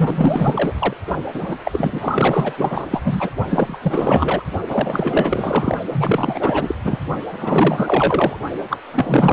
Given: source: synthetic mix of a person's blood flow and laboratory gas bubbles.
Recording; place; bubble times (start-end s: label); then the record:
Doppler ultrasound of blood flow; precordium
0.00-0.74 s: bubbles
0.78-0.94 s: bubbles
1.33-1.56 s: bubbles
1.65-2.86 s: bubbles
2.90-3.01 s: bubbles
3.04-3.30 s: bubbles
3.50-3.78 s: bubbles
3.83-4.43 s: bubbles
4.69-5.78 s: bubbles
5.92-6.77 s: bubbles
6.84-7.00 s: bubbles
7.32-8.37 s: bubbles
8.69-8.79 s: bubbles
8.92-9.33 s: bubbles
From the record:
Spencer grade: 4 (maximum detectable bubble signal sounding continuously throughout systole and diastole of every cardiac period, and overriding the amplitude of the normal cardiac signals); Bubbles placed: only in the low amplitude regions of the cardiac cycle